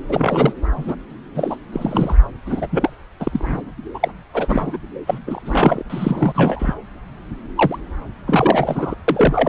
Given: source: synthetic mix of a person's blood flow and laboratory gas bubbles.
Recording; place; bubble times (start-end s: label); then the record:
Doppler ultrasound of blood flow; subclavian vein
0.09-0.53 s: bubbles
0.76-0.95 s: bubbles
1.35-1.56 s: bubbles
1.72-2.15 s: bubbles
2.46-2.68 s: bubbles
2.71-2.90 s: bubbles
3.19-3.62 s: bubbles
3.94-4.08 s: bubbles
4.33-4.78 s: bubbles
5.07-5.19 s: bubbles
5.26-5.83 s: bubbles
5.89-6.75 s: bubbles
7.55-7.78 s: bubbles
8.27-8.96 s: bubbles
9.08-9.49 s: bubbles
From the record:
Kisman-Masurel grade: 342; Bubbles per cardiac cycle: rolling drumbeat, 9 or more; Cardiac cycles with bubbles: 100%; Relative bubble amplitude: moderate (0.250 to 0.450); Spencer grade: 3 (all of the cardiac periods contain showers or single bubble signals, but not dominating or overriding the cardiac motion signals); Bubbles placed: anywhere in the cardiac cycle